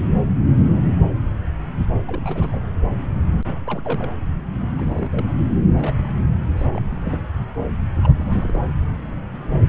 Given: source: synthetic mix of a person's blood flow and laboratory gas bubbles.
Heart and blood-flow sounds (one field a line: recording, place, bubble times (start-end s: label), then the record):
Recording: Doppler ultrasound of blood flow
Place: subclavian vein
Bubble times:
2.07-2.64 s: bubbles
3.45-3.61 s: bubbles
3.65-3.82 s: bubbles
3.84-4.09 s: bubbles
4.78-5.25 s: bubbles
5.74-6.15 s: bubbles
6.57-6.82 s: bubbles
6.90-7.27 s: bubbles
8.03-8.14 s: bubbles
8.17-8.59 s: bubbles
From the record:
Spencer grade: 2 (many but less than half of the cardiac periods contain bubble signals, singularly or in groups)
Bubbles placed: anywhere in the cardiac cycle